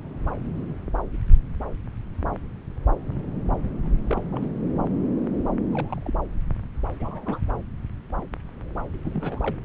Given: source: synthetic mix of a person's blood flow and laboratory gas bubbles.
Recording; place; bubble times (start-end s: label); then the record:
Doppler ultrasound of blood flow; subclavian vein
3.83-3.90 s: bubbles
4.05-4.20 s: bubbles
4.32-4.50 s: bubbles
5.72-6.03 s: bubbles
6.06-6.14 s: bubbles
7.00-7.40 s: bubbles
9.04-9.55 s: bubbles
From the record:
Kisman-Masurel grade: 221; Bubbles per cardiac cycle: several, 3 to 8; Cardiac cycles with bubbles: 10 to 50%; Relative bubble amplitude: barely perceptible (0.100 to 0.250); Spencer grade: 2 (many but less than half of the cardiac periods contain bubble signals, singularly or in groups); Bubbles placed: anywhere in the cardiac cycle